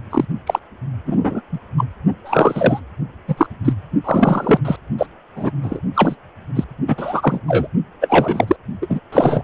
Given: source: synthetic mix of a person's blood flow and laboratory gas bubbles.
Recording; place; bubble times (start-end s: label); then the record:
Doppler ultrasound of blood flow; precordium
0.10-0.26 s: bubbles
0.46-0.59 s: bubbles
1.05-1.42 s: bubbles
1.52-1.59 s: bubbles
1.78-1.84 s: bubbles
2.25-2.80 s: bubbles
3.28-3.46 s: bubbles
3.64-3.73 s: bubbles
4.04-4.59 s: bubbles
4.64-4.76 s: bubbles
4.98-5.06 s: bubbles
5.35-5.51 s: bubbles
5.63-5.79 s: bubbles
5.94-6.15 s: bubbles
6.55-6.64 s: bubbles
6.88-7.40 s: bubbles
7.47-7.67 s: bubbles
8.01-8.56 s: bubbles
8.81-8.87 s: bubbles
8.89-8.99 s: bubbles
9.12-9.42 s: bubbles
From the record:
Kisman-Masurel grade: 243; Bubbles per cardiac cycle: several, 3 to 8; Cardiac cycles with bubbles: 100%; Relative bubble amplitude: loud (0.450 to 0.775); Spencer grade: 3 (all of the cardiac periods contain showers or single bubble signals, but not dominating or overriding the cardiac motion signals); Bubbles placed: only in the low amplitude regions of the cardiac cycle